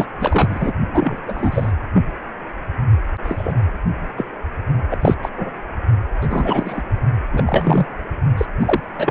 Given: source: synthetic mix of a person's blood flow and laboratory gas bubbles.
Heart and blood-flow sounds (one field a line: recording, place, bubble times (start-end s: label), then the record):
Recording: Doppler ultrasound of blood flow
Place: precordium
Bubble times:
0.00-0.07 s: bubbles
0.20-0.73 s: bubbles
0.94-1.18 s: bubbles
1.28-1.72 s: bubbles
1.94-2.04 s: bubbles
3.23-3.53 s: bubbles
4.17-4.25 s: bubbles
4.91-4.96 s: bubbles
5.01-5.14 s: bubbles
5.22-5.29 s: bubbles
5.37-5.50 s: bubbles
6.21-6.82 s: bubbles
7.33-7.86 s: bubbles
8.37-8.46 s: bubbles
8.60-8.80 s: bubbles
8.98-9.11 s: bubbles
From the record:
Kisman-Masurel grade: 243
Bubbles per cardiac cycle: several, 3 to 8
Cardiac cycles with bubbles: 100%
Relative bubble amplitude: loud (0.450 to 0.775)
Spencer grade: 3 (all of the cardiac periods contain showers or single bubble signals, but not dominating or overriding the cardiac motion signals)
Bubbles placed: only in the low amplitude regions of the cardiac cycle